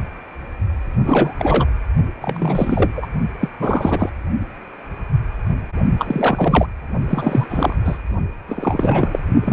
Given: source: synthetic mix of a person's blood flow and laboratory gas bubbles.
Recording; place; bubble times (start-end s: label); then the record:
Doppler ultrasound of blood flow; precordium
0.92-1.35 s: bubbles
1.38-1.67 s: bubbles
2.21-2.90 s: bubbles
2.94-3.06 s: bubbles
3.40-3.48 s: bubbles
3.59-4.12 s: bubbles
5.99-6.67 s: bubbles
7.08-7.76 s: bubbles
7.84-7.98 s: bubbles
8.48-9.19 s: bubbles
9.45-9.53 s: bubbles
From the record:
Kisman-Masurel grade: 333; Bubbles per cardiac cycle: rolling drumbeat, 9 or more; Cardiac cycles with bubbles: 50 to 99%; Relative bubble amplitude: loud (0.450 to 0.775); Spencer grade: 3 (all of the cardiac periods contain showers or single bubble signals, but not dominating or overriding the cardiac motion signals); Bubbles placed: only in the low amplitude regions of the cardiac cycle